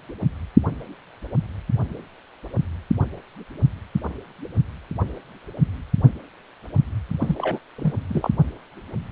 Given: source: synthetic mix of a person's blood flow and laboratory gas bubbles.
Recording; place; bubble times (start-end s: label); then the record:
Doppler ultrasound of blood flow; precordium
7.19-7.35 s: bubbles
7.38-7.59 s: bubbles
7.78-7.94 s: bubbles
8.09-8.30 s: bubbles
From the record:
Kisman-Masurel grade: 212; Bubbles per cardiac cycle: several, 3 to 8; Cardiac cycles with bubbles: 1 to 10%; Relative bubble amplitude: moderate (0.250 to 0.450); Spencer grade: 1 (occasional bubble signal discernible with the cardiac motion signal, with majority of cardiac periods free of bubbles); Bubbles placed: only in the low amplitude regions of the cardiac cycle